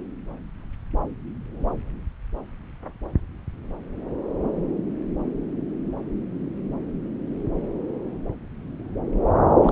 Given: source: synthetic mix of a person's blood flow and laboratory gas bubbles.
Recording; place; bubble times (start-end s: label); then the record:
Doppler ultrasound of blood flow; subclavian vein
9.62-9.72 s: bubbles
From the record:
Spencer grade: 1 (occasional bubble signal discernible with the cardiac motion signal, with majority of cardiac periods free of bubbles); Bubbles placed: anywhere in the cardiac cycle